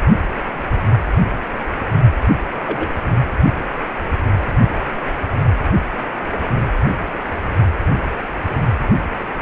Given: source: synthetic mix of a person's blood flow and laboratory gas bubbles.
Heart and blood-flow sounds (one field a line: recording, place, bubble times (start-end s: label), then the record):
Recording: Doppler ultrasound of blood flow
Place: precordium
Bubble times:
2.66-2.89 s: bubbles
From the record:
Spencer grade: 1 (occasional bubble signal discernible with the cardiac motion signal, with majority of cardiac periods free of bubbles)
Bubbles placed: anywhere in the cardiac cycle